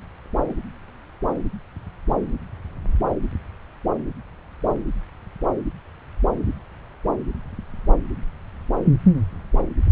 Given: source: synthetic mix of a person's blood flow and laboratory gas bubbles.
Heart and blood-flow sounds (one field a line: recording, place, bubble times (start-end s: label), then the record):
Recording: Doppler ultrasound of blood flow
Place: subclavian vein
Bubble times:
no bubbles
From the record:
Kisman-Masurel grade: 000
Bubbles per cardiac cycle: 0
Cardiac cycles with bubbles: 0%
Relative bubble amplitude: no bubbles discernible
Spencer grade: 0 (complete lack of bubble signals)